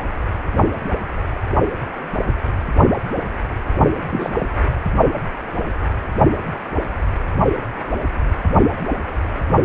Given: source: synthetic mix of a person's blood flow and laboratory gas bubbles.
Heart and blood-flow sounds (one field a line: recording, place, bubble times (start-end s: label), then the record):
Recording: Doppler ultrasound of blood flow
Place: precordium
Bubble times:
4.10-4.33 s: bubbles
4.39-4.47 s: bubbles
From the record:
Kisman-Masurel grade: 212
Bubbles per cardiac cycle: several, 3 to 8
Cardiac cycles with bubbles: 1 to 10%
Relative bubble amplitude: moderate (0.250 to 0.450)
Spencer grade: 1 (occasional bubble signal discernible with the cardiac motion signal, with majority of cardiac periods free of bubbles)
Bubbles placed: only in the low amplitude regions of the cardiac cycle